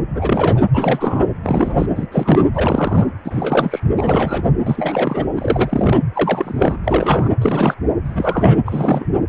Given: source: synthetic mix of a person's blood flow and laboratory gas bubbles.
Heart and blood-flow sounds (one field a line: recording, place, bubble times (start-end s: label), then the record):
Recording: Doppler ultrasound of blood flow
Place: precordium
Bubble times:
0.00-0.02 s: bubbles
0.15-0.65 s: bubbles
0.73-1.27 s: bubbles
1.43-1.86 s: bubbles
1.95-2.07 s: bubbles
2.12-2.49 s: bubbles
2.53-3.08 s: bubbles
3.25-3.80 s: bubbles
3.97-4.51 s: bubbles
4.66-5.25 s: bubbles
5.36-6.02 s: bubbles
6.13-6.76 s: bubbles
6.83-7.31 s: bubbles
7.38-7.75 s: bubbles
8.04-8.61 s: bubbles
8.65-9.06 s: bubbles
From the record:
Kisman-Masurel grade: 343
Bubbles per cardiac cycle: rolling drumbeat, 9 or more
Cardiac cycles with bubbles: 100%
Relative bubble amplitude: loud (0.450 to 0.775)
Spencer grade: 3 (all of the cardiac periods contain showers or single bubble signals, but not dominating or overriding the cardiac motion signals)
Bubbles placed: anywhere in the cardiac cycle